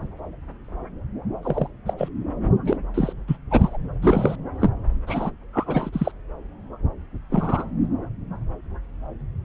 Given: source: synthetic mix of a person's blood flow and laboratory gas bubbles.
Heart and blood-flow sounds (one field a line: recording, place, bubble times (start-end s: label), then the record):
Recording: Doppler ultrasound of blood flow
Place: subclavian vein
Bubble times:
1.43-1.68 s: bubbles
1.86-1.94 s: bubbles
1.98-2.08 s: bubbles
2.66-2.77 s: bubbles
2.94-3.13 s: bubbles
3.28-3.37 s: bubbles
3.51-3.77 s: bubbles
4.02-4.36 s: bubbles
4.59-4.70 s: bubbles
5.07-5.31 s: bubbles
5.53-5.90 s: bubbles
5.92-6.12 s: bubbles
7.30-7.65 s: bubbles
From the record:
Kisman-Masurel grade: 232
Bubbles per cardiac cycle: several, 3 to 8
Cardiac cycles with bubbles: 50 to 99%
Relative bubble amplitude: moderate (0.250 to 0.450)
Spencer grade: 3 (all of the cardiac periods contain showers or single bubble signals, but not dominating or overriding the cardiac motion signals)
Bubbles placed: anywhere in the cardiac cycle